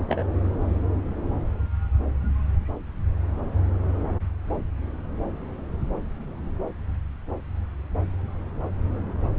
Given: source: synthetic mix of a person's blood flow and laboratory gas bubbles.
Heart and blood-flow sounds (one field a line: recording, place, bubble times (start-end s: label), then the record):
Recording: Doppler ultrasound of blood flow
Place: subclavian vein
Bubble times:
0.08-0.23 s: bubbles
From the record:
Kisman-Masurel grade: 111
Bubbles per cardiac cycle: 1 to 2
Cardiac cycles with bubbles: 1 to 10%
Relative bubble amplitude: barely perceptible (0.100 to 0.250)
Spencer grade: 1 (occasional bubble signal discernible with the cardiac motion signal, with majority of cardiac periods free of bubbles)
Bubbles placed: anywhere in the cardiac cycle